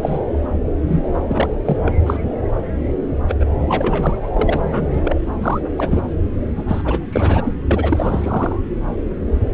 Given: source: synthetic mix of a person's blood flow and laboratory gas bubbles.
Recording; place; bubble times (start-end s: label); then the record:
Doppler ultrasound of blood flow; subclavian vein
0.02-0.19 s: bubbles
0.88-1.04 s: bubbles
1.29-1.54 s: bubbles
1.65-1.78 s: bubbles
1.84-1.93 s: bubbles
2.06-2.17 s: bubbles
3.28-3.35 s: bubbles
3.40-3.44 s: bubbles
3.69-4.29 s: bubbles
4.33-5.15 s: bubbles
5.42-5.61 s: bubbles
5.77-6.03 s: bubbles
6.57-6.65 s: bubbles
6.68-6.82 s: bubbles
6.84-7.06 s: bubbles
7.12-7.53 s: bubbles
7.71-8.56 s: bubbles
From the record:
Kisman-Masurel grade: 232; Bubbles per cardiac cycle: several, 3 to 8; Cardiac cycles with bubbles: 50 to 99%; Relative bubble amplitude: moderate (0.250 to 0.450); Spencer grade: 3 (all of the cardiac periods contain showers or single bubble signals, but not dominating or overriding the cardiac motion signals); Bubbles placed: anywhere in the cardiac cycle